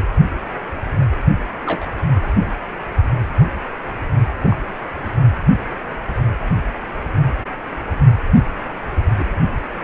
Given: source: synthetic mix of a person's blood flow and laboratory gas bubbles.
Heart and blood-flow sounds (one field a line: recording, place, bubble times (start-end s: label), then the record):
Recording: Doppler ultrasound of blood flow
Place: precordium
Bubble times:
1.66-1.90 s: bubbles
4.42-4.57 s: bubbles
8.69-8.72 s: bubbles
9.15-9.26 s: bubbles
From the record:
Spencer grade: 2 (many but less than half of the cardiac periods contain bubble signals, singularly or in groups)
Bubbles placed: anywhere in the cardiac cycle